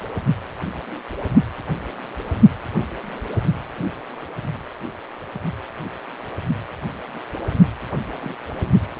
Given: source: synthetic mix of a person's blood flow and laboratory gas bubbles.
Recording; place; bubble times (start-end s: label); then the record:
Doppler ultrasound of blood flow; precordium
8.13-8.33 s: bubbles
From the record:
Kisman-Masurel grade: 111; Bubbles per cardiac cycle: 1 to 2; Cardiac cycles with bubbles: 1 to 10%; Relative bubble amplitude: barely perceptible (0.100 to 0.250); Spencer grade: 1 (occasional bubble signal discernible with the cardiac motion signal, with majority of cardiac periods free of bubbles); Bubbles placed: anywhere in the cardiac cycle